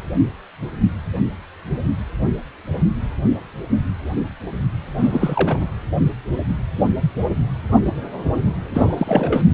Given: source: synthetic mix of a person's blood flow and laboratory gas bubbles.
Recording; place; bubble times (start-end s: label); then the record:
Doppler ultrasound of blood flow; precordium
4.96-5.68 s: bubbles
8.74-9.42 s: bubbles
From the record:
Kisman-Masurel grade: 222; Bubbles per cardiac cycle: several, 3 to 8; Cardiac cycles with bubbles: 10 to 50%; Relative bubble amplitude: moderate (0.250 to 0.450); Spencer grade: 2 (many but less than half of the cardiac periods contain bubble signals, singularly or in groups); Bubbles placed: anywhere in the cardiac cycle